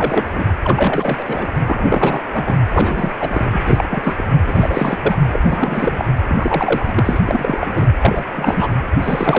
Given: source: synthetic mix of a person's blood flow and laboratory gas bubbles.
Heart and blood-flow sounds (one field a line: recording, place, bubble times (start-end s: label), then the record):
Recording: Doppler ultrasound of blood flow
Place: precordium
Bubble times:
0.00-0.25 s: bubbles
0.31-0.46 s: bubbles
0.62-1.48 s: bubbles
1.67-2.20 s: bubbles
2.32-2.56 s: bubbles
2.74-3.09 s: bubbles
3.20-3.60 s: bubbles
3.67-3.86 s: bubbles
3.89-4.25 s: bubbles
4.46-4.98 s: bubbles
5.02-5.17 s: bubbles
5.32-6.05 s: bubbles
6.29-7.19 s: bubbles
7.25-7.88 s: bubbles
8.00-8.23 s: bubbles
8.36-8.69 s: bubbles
9.02-9.39 s: bubbles
From the record:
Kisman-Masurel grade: 342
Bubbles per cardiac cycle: rolling drumbeat, 9 or more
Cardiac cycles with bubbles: 100%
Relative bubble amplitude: moderate (0.250 to 0.450)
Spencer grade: 3 (all of the cardiac periods contain showers or single bubble signals, but not dominating or overriding the cardiac motion signals)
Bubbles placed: anywhere in the cardiac cycle